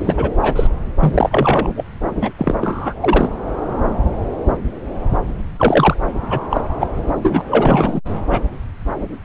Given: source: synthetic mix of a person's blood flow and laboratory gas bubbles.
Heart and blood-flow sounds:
Doppler ultrasound of blood flow; subclavian vein
0.00-0.31 s: bubbles
0.41-0.67 s: bubbles
1.00-1.69 s: bubbles
1.77-1.85 s: bubbles
2.21-2.29 s: bubbles
2.37-2.55 s: bubbles
2.61-2.94 s: bubbles
3.02-3.29 s: bubbles
5.58-5.95 s: bubbles
6.30-6.41 s: bubbles
6.50-6.61 s: bubbles
6.80-6.87 s: bubbles
7.22-7.42 s: bubbles
7.48-8.01 s: bubbles
8.30-8.40 s: bubbles
From the record:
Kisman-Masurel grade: 233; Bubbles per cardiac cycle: several, 3 to 8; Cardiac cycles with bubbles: 50 to 99%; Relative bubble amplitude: loud (0.450 to 0.775); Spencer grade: 3 (all of the cardiac periods contain showers or single bubble signals, but not dominating or overriding the cardiac motion signals); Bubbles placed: anywhere in the cardiac cycle

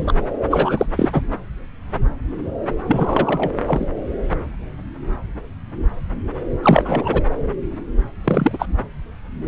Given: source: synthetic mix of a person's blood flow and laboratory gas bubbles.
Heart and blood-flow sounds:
Doppler ultrasound of blood flow; subclavian vein
0.00-0.13 s: bubbles
0.51-0.86 s: bubbles
0.96-1.09 s: bubbles
1.12-1.21 s: bubbles
2.86-3.50 s: bubbles
3.66-3.87 s: bubbles
6.62-7.23 s: bubbles
8.24-8.65 s: bubbles
From the record:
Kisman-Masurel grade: 223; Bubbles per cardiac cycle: several, 3 to 8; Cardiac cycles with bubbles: 10 to 50%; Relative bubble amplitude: loud (0.450 to 0.775); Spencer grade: 2 (many but less than half of the cardiac periods contain bubble signals, singularly or in groups); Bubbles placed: anywhere in the cardiac cycle

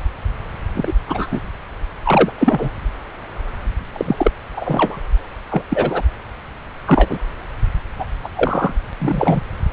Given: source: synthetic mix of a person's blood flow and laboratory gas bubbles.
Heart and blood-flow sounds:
Doppler ultrasound of blood flow; subclavian vein
0.73-0.93 s: bubbles
1.07-1.27 s: bubbles
1.31-1.40 s: bubbles
2.03-2.31 s: bubbles
2.38-2.70 s: bubbles
3.92-4.31 s: bubbles
4.56-5.02 s: bubbles
5.50-5.62 s: bubbles
5.70-6.01 s: bubbles
6.87-7.19 s: bubbles
7.98-8.04 s: bubbles
8.23-8.29 s: bubbles
8.36-8.74 s: bubbles
8.99-9.40 s: bubbles
From the record:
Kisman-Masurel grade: 233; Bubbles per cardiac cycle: several, 3 to 8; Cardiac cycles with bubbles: 50 to 99%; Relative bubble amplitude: loud (0.450 to 0.775); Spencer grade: 3 (all of the cardiac periods contain showers or single bubble signals, but not dominating or overriding the cardiac motion signals); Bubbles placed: anywhere in the cardiac cycle

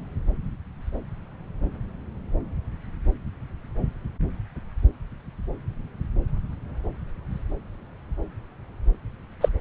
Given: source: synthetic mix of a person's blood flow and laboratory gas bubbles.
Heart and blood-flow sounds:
Doppler ultrasound of blood flow; subclavian vein
9.40-9.48 s: bubbles
From the record:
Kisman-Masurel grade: 113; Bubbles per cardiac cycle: 1 to 2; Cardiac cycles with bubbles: 1 to 10%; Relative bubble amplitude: loud (0.450 to 0.775); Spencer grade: 1 (occasional bubble signal discernible with the cardiac motion signal, with majority of cardiac periods free of bubbles); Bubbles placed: anywhere in the cardiac cycle

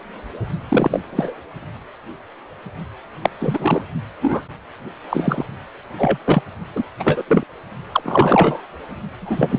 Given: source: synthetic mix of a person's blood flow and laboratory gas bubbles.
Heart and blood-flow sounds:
Doppler ultrasound of blood flow; precordium
0.68-1.00 s: bubbles
1.05-1.33 s: bubbles
3.22-3.30 s: bubbles
3.40-3.82 s: bubbles
4.22-4.42 s: bubbles
5.10-5.46 s: bubbles
5.98-6.19 s: bubbles
6.25-6.42 s: bubbles
6.75-6.83 s: bubbles
7.00-7.23 s: bubbles
7.27-7.44 s: bubbles
7.92-8.62 s: bubbles
9.21-9.59 s: bubbles
From the record:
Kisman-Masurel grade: 233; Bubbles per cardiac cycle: several, 3 to 8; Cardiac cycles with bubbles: 50 to 99%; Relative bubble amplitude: loud (0.450 to 0.775); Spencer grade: 3 (all of the cardiac periods contain showers or single bubble signals, but not dominating or overriding the cardiac motion signals); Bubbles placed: only in the low amplitude regions of the cardiac cycle

